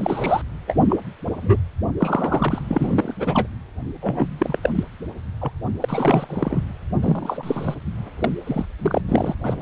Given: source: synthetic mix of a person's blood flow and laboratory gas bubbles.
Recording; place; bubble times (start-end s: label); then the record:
Doppler ultrasound of blood flow; precordium
0.00-0.41 s: bubbles
0.67-0.75 s: bubbles
0.89-0.96 s: bubbles
1.42-1.56 s: bubbles
1.97-2.61 s: bubbles
2.69-3.14 s: bubbles
3.19-3.48 s: bubbles
4.02-4.28 s: bubbles
4.38-4.58 s: bubbles
4.62-4.70 s: bubbles
4.75-4.83 s: bubbles
5.41-5.53 s: bubbles
5.81-6.61 s: bubbles
7.02-7.75 s: bubbles
8.24-8.29 s: bubbles
8.46-8.65 s: bubbles
8.79-9.02 s: bubbles
9.08-9.34 s: bubbles
9.44-9.62 s: bubbles
From the record:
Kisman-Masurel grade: 242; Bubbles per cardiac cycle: several, 3 to 8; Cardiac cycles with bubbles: 100%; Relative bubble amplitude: moderate (0.250 to 0.450); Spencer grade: 3 (all of the cardiac periods contain showers or single bubble signals, but not dominating or overriding the cardiac motion signals); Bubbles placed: anywhere in the cardiac cycle